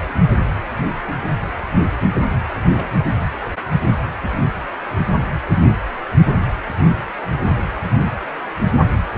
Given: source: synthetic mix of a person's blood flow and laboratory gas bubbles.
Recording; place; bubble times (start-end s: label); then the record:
Doppler ultrasound of blood flow; precordium
2.73-2.89 s: bubbles
5.18-5.25 s: bubbles
From the record:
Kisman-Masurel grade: 121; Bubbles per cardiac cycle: 1 to 2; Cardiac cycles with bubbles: 10 to 50%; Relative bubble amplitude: barely perceptible (0.100 to 0.250); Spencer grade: 2 (many but less than half of the cardiac periods contain bubble signals, singularly or in groups); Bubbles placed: anywhere in the cardiac cycle